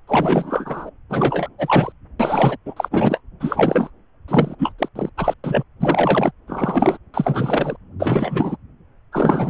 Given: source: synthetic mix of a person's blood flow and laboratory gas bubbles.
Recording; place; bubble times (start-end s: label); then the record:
Doppler ultrasound of blood flow; subclavian vein
0.07-0.90 s: bubbles
1.09-1.48 s: bubbles
1.58-1.93 s: bubbles
2.19-2.57 s: bubbles
2.66-2.74 s: bubbles
2.77-3.20 s: bubbles
3.40-3.90 s: bubbles
4.28-4.55 s: bubbles
4.59-4.73 s: bubbles
4.78-4.88 s: bubbles
4.95-5.09 s: bubbles
5.17-5.34 s: bubbles
5.44-5.63 s: bubbles
5.80-6.31 s: bubbles
6.48-6.98 s: bubbles
7.13-7.76 s: bubbles
8.00-8.56 s: bubbles
9.12-9.50 s: bubbles
From the record:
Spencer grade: 3 (all of the cardiac periods contain showers or single bubble signals, but not dominating or overriding the cardiac motion signals); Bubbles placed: anywhere in the cardiac cycle